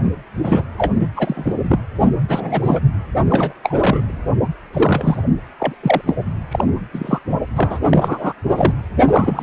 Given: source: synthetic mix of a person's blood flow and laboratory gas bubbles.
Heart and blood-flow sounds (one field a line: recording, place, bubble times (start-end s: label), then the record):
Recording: Doppler ultrasound of blood flow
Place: precordium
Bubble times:
0.42-0.65 s: bubbles
0.77-0.93 s: bubbles
1.00-1.08 s: bubbles
1.16-1.55 s: bubbles
1.62-1.78 s: bubbles
2.29-2.80 s: bubbles
3.30-3.53 s: bubbles
3.63-4.18 s: bubbles
4.73-5.23 s: bubbles
5.59-5.75 s: bubbles
5.83-6.01 s: bubbles
6.06-6.14 s: bubbles
6.51-6.64 s: bubbles
6.93-7.19 s: bubbles
7.55-7.79 s: bubbles
7.90-8.33 s: bubbles
8.52-8.72 s: bubbles
9.07-9.43 s: bubbles
From the record:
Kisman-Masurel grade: 342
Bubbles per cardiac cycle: rolling drumbeat, 9 or more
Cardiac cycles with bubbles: 100%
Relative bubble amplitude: moderate (0.250 to 0.450)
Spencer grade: 3 (all of the cardiac periods contain showers or single bubble signals, but not dominating or overriding the cardiac motion signals)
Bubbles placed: anywhere in the cardiac cycle